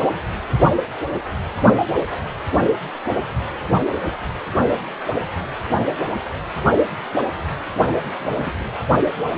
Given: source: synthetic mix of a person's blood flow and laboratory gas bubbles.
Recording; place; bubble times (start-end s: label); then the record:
Doppler ultrasound of blood flow; precordium
8.20-8.52 s: bubbles
From the record:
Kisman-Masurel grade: 111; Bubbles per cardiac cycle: 1 to 2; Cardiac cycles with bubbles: 1 to 10%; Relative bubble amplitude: barely perceptible (0.100 to 0.250); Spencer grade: 1 (occasional bubble signal discernible with the cardiac motion signal, with majority of cardiac periods free of bubbles); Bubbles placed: only in the low amplitude regions of the cardiac cycle